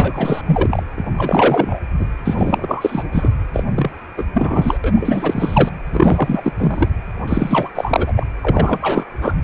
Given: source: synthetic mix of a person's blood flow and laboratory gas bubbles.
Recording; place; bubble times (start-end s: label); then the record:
Doppler ultrasound of blood flow; precordium
0.00-0.42 s: bubbles
0.45-0.83 s: bubbles
0.96-1.04 s: bubbles
1.17-1.80 s: bubbles
1.99-2.07 s: bubbles
2.25-3.03 s: bubbles
3.12-3.29 s: bubbles
3.53-3.64 s: bubbles
3.75-3.91 s: bubbles
4.17-4.24 s: bubbles
4.33-4.78 s: bubbles
4.84-5.72 s: bubbles
5.91-6.53 s: bubbles
6.58-6.91 s: bubbles
7.27-7.70 s: bubbles
7.75-8.12 s: bubbles
8.16-8.26 s: bubbles
8.42-9.05 s: bubbles
9.21-9.34 s: bubbles
From the record:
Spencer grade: 3 (all of the cardiac periods contain showers or single bubble signals, but not dominating or overriding the cardiac motion signals); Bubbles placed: anywhere in the cardiac cycle